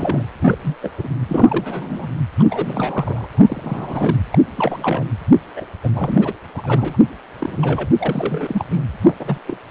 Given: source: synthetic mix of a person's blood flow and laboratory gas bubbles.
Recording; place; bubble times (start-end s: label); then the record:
Doppler ultrasound of blood flow; precordium
0.00-0.24 s: bubbles
0.40-0.56 s: bubbles
0.62-0.78 s: bubbles
0.82-0.91 s: bubbles
0.97-1.08 s: bubbles
1.28-2.13 s: bubbles
2.39-2.43 s: bubbles
2.50-3.27 s: bubbles
3.32-4.18 s: bubbles
4.32-4.38 s: bubbles
4.56-5.04 s: bubbles
5.56-5.66 s: bubbles
5.83-5.89 s: bubbles
5.93-6.33 s: bubbles
6.54-6.97 s: bubbles
7.39-7.89 s: bubbles
7.98-8.64 s: bubbles
8.70-8.81 s: bubbles
9.02-9.15 s: bubbles
9.19-9.38 s: bubbles
9.46-9.57 s: bubbles
9.68-9.70 s: bubbles
From the record:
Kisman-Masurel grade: 342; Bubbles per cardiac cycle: rolling drumbeat, 9 or more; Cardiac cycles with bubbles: 100%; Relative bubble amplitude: moderate (0.250 to 0.450); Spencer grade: 3 (all of the cardiac periods contain showers or single bubble signals, but not dominating or overriding the cardiac motion signals); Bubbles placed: anywhere in the cardiac cycle